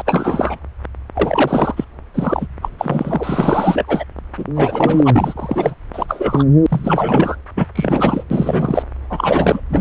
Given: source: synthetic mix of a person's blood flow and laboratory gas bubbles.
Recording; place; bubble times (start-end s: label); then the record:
Doppler ultrasound of blood flow; subclavian vein
0.00-0.02 s: bubbles
0.05-0.57 s: bubbles
1.15-1.84 s: bubbles
2.14-2.47 s: bubbles
2.61-2.69 s: bubbles
2.79-4.04 s: bubbles
4.37-4.45 s: bubbles
4.56-5.75 s: bubbles
5.93-6.44 s: bubbles
6.69-7.36 s: bubbles
7.56-7.65 s: bubbles
7.75-8.23 s: bubbles
8.30-8.82 s: bubbles
9.09-9.60 s: bubbles
9.69-9.81 s: bubbles
From the record:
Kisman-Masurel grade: 343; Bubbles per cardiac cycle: rolling drumbeat, 9 or more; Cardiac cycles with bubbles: 100%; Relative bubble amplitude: loud (0.450 to 0.775); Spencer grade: 3 (all of the cardiac periods contain showers or single bubble signals, but not dominating or overriding the cardiac motion signals); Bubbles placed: anywhere in the cardiac cycle